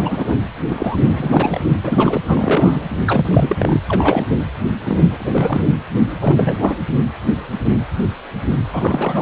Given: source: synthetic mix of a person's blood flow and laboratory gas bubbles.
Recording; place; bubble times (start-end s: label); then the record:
Doppler ultrasound of blood flow; precordium
0.00-0.36 s: bubbles
0.68-0.98 s: bubbles
1.00-1.59 s: bubbles
1.64-1.72 s: bubbles
1.83-2.20 s: bubbles
2.27-2.83 s: bubbles
3.06-3.56 s: bubbles
3.59-3.79 s: bubbles
3.88-4.27 s: bubbles
4.85-5.01 s: bubbles
5.10-5.61 s: bubbles
6.21-6.75 s: bubbles
8.71-9.22 s: bubbles
From the record:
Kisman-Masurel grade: 333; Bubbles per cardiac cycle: rolling drumbeat, 9 or more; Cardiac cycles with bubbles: 50 to 99%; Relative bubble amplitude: loud (0.450 to 0.775); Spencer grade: 3 (all of the cardiac periods contain showers or single bubble signals, but not dominating or overriding the cardiac motion signals); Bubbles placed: anywhere in the cardiac cycle